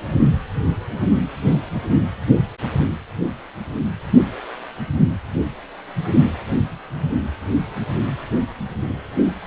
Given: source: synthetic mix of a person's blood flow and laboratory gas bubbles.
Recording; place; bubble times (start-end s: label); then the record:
Doppler ultrasound of blood flow; precordium
9.24-9.32 s: bubbles
From the record:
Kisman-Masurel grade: 221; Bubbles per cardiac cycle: several, 3 to 8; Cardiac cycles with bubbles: 10 to 50%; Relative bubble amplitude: barely perceptible (0.100 to 0.250); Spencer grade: 2 (many but less than half of the cardiac periods contain bubble signals, singularly or in groups); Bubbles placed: anywhere in the cardiac cycle